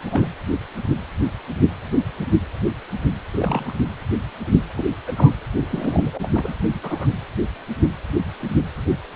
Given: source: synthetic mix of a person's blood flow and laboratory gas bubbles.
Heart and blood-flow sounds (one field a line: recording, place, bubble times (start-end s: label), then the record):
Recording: Doppler ultrasound of blood flow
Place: precordium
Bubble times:
0.00-0.27 s: bubbles
3.33-3.73 s: bubbles
4.74-4.85 s: bubbles
5.07-5.12 s: bubbles
5.16-5.32 s: bubbles
5.70-6.31 s: bubbles
6.35-6.54 s: bubbles
6.74-6.79 s: bubbles
6.83-7.09 s: bubbles
From the record:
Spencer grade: 2 (many but less than half of the cardiac periods contain bubble signals, singularly or in groups)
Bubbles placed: anywhere in the cardiac cycle